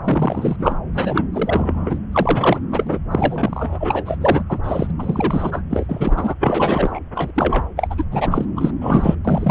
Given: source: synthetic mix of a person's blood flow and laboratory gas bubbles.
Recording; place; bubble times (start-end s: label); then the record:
Doppler ultrasound of blood flow; subclavian vein
0.04-0.78 s: bubbles
0.92-1.26 s: bubbles
1.33-1.99 s: bubbles
2.12-2.59 s: bubbles
2.72-2.98 s: bubbles
3.11-4.17 s: bubbles
4.21-4.43 s: bubbles
4.49-4.59 s: bubbles
4.63-4.91 s: bubbles
4.98-5.62 s: bubbles
5.70-6.34 s: bubbles
6.40-7.00 s: bubbles
7.14-7.31 s: bubbles
7.35-7.66 s: bubbles
7.76-7.88 s: bubbles
7.90-7.95 s: bubbles
7.97-8.05 s: bubbles
8.11-8.45 s: bubbles
8.56-8.71 s: bubbles
8.81-9.15 s: bubbles
9.24-9.50 s: bubbles
From the record:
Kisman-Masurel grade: 343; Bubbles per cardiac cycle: rolling drumbeat, 9 or more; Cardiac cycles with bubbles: 100%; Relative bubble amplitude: loud (0.450 to 0.775); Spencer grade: 3 (all of the cardiac periods contain showers or single bubble signals, but not dominating or overriding the cardiac motion signals); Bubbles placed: anywhere in the cardiac cycle